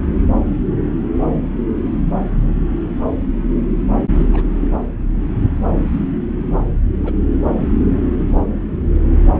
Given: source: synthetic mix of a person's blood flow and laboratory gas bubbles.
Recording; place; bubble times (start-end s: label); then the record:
Doppler ultrasound of blood flow; subclavian vein
0.85-0.92 s: bubbles
4.16-4.28 s: bubbles
4.32-4.45 s: bubbles
6.59-6.65 s: bubbles
7.04-7.15 s: bubbles
From the record:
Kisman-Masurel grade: 121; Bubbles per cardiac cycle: 1 to 2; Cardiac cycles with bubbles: 10 to 50%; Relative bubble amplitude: barely perceptible (0.100 to 0.250); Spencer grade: 2 (many but less than half of the cardiac periods contain bubble signals, singularly or in groups); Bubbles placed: anywhere in the cardiac cycle